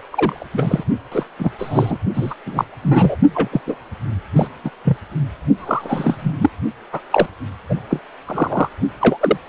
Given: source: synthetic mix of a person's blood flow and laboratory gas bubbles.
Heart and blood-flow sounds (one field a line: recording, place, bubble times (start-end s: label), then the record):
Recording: Doppler ultrasound of blood flow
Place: precordium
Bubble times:
0.10-0.46 s: bubbles
0.53-0.83 s: bubbles
1.11-1.24 s: bubbles
1.39-1.52 s: bubbles
1.58-1.98 s: bubbles
2.14-2.35 s: bubbles
2.46-2.65 s: bubbles
2.83-3.16 s: bubbles
3.33-3.49 s: bubbles
3.52-3.60 s: bubbles
3.66-3.75 s: bubbles
4.36-4.47 s: bubbles
4.64-4.70 s: bubbles
4.84-4.97 s: bubbles
5.57-6.34 s: bubbles
6.40-6.50 s: bubbles
6.92-7.00 s: bubbles
7.11-7.27 s: bubbles
7.69-7.74 s: bubbles
7.90-8.01 s: bubbles
8.27-8.69 s: bubbles
9.00-9.38 s: bubbles
9.46-9.49 s: bubbles
From the record:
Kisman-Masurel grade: 243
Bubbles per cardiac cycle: several, 3 to 8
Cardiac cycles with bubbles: 100%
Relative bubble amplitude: loud (0.450 to 0.775)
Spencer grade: 3 (all of the cardiac periods contain showers or single bubble signals, but not dominating or overriding the cardiac motion signals)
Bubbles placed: only in the low amplitude regions of the cardiac cycle